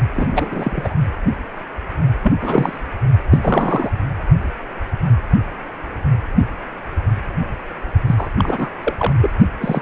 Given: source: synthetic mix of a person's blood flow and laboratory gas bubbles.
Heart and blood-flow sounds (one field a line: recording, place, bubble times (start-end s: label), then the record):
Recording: Doppler ultrasound of blood flow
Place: precordium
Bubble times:
0.15-0.26 s: bubbles
0.30-0.94 s: bubbles
2.23-2.33 s: bubbles
2.38-2.80 s: bubbles
3.31-3.91 s: bubbles
8.06-8.29 s: bubbles
8.38-8.70 s: bubbles
8.84-9.13 s: bubbles
9.21-9.30 s: bubbles
9.61-9.82 s: bubbles
From the record:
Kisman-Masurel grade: 332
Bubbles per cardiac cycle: rolling drumbeat, 9 or more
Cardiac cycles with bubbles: 50 to 99%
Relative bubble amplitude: moderate (0.250 to 0.450)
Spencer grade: 3 (all of the cardiac periods contain showers or single bubble signals, but not dominating or overriding the cardiac motion signals)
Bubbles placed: only in the low amplitude regions of the cardiac cycle